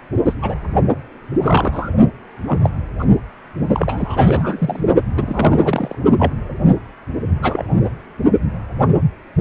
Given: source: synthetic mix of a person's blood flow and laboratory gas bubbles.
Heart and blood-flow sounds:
Doppler ultrasound of blood flow; precordium
0.25-0.35 s: bubbles
0.41-0.55 s: bubbles
1.42-1.90 s: bubbles
2.48-2.59 s: bubbles
2.63-2.71 s: bubbles
2.98-3.04 s: bubbles
3.72-4.88 s: bubbles
5.14-5.95 s: bubbles
6.18-6.33 s: bubbles
7.42-7.65 s: bubbles
7.84-7.90 s: bubbles
From the record:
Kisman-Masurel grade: 232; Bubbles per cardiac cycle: several, 3 to 8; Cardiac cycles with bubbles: 50 to 99%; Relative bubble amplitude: moderate (0.250 to 0.450); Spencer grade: 3 (all of the cardiac periods contain showers or single bubble signals, but not dominating or overriding the cardiac motion signals); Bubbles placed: only in the low amplitude regions of the cardiac cycle

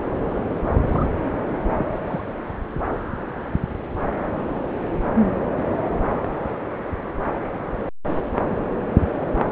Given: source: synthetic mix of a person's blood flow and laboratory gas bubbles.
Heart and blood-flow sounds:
Doppler ultrasound of blood flow; subclavian vein
0.87-1.06 s: bubbles
1.74-1.86 s: bubbles
1.93-1.99 s: bubbles
2.06-2.24 s: bubbles
From the record:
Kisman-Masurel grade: 211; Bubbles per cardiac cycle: several, 3 to 8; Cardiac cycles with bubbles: 1 to 10%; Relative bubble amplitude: barely perceptible (0.100 to 0.250); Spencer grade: 1 (occasional bubble signal discernible with the cardiac motion signal, with majority of cardiac periods free of bubbles); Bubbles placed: anywhere in the cardiac cycle

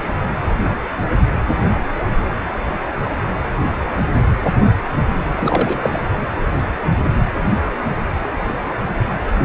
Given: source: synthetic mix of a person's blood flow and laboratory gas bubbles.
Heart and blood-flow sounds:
Doppler ultrasound of blood flow; precordium
5.36-5.79 s: bubbles
5.82-6.02 s: bubbles
From the record:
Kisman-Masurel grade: 212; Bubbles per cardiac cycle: several, 3 to 8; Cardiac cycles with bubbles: 1 to 10%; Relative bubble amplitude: moderate (0.250 to 0.450); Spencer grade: 1 (occasional bubble signal discernible with the cardiac motion signal, with majority of cardiac periods free of bubbles); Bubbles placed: anywhere in the cardiac cycle

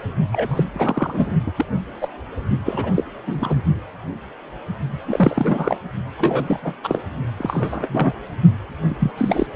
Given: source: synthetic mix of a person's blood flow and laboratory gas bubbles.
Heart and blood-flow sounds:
Doppler ultrasound of blood flow; precordium
0.32-0.64 s: bubbles
0.73-1.33 s: bubbles
1.46-1.51 s: bubbles
1.56-1.65 s: bubbles
2.01-2.08 s: bubbles
2.65-2.91 s: bubbles
2.96-3.04 s: bubbles
3.27-3.60 s: bubbles
4.90-5.79 s: bubbles
6.17-6.74 s: bubbles
6.83-7.01 s: bubbles
7.37-8.13 s: bubbles
8.90-8.94 s: bubbles
9.00-9.11 s: bubbles
9.17-9.46 s: bubbles
From the record:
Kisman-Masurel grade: 232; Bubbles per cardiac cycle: several, 3 to 8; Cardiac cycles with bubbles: 50 to 99%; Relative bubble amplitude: moderate (0.250 to 0.450); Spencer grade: 3 (all of the cardiac periods contain showers or single bubble signals, but not dominating or overriding the cardiac motion signals); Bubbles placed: only in the low amplitude regions of the cardiac cycle

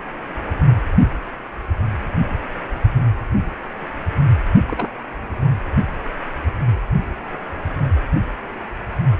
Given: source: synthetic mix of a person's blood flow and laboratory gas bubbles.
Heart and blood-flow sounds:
Doppler ultrasound of blood flow; precordium
4.68-4.87 s: bubbles
From the record:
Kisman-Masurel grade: 111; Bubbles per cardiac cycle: 1 to 2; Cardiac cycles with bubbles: 1 to 10%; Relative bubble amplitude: barely perceptible (0.100 to 0.250); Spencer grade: 1 (occasional bubble signal discernible with the cardiac motion signal, with majority of cardiac periods free of bubbles); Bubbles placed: anywhere in the cardiac cycle

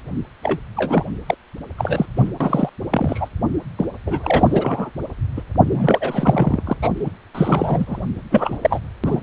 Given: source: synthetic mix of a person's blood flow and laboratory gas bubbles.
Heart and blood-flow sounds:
Doppler ultrasound of blood flow; precordium
0.43-0.58 s: bubbles
0.77-1.05 s: bubbles
1.27-1.35 s: bubbles
1.78-2.06 s: bubbles
2.16-2.30 s: bubbles
2.40-2.70 s: bubbles
2.91-3.28 s: bubbles
3.78-3.85 s: bubbles
4.06-4.89 s: bubbles
5.36-5.43 s: bubbles
5.70-6.61 s: bubbles
6.65-6.76 s: bubbles
6.82-7.09 s: bubbles
7.34-8.00 s: bubbles
8.30-8.57 s: bubbles
8.62-8.79 s: bubbles
9.04-9.22 s: bubbles
From the record:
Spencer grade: 3 (all of the cardiac periods contain showers or single bubble signals, but not dominating or overriding the cardiac motion signals); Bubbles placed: anywhere in the cardiac cycle

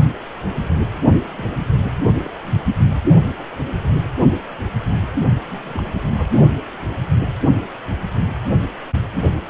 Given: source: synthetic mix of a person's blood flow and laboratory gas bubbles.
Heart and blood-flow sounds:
Doppler ultrasound of blood flow; precordium
1.36-1.61 s: bubbles
2.12-2.29 s: bubbles
2.42-2.85 s: bubbles
5.46-5.93 s: bubbles
5.99-6.31 s: bubbles
From the record:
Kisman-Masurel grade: 221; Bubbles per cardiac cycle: several, 3 to 8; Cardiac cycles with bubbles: 10 to 50%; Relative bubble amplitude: barely perceptible (0.100 to 0.250); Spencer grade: 2 (many but less than half of the cardiac periods contain bubble signals, singularly or in groups); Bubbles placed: only in the low amplitude regions of the cardiac cycle

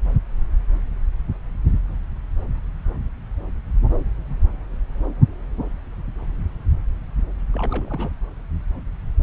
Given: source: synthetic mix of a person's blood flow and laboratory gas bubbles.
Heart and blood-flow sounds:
Doppler ultrasound of blood flow; subclavian vein
7.52-8.10 s: bubbles
From the record:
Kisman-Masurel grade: 211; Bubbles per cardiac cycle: several, 3 to 8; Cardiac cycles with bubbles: 1 to 10%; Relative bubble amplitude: barely perceptible (0.100 to 0.250); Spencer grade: 1 (occasional bubble signal discernible with the cardiac motion signal, with majority of cardiac periods free of bubbles); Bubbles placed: anywhere in the cardiac cycle

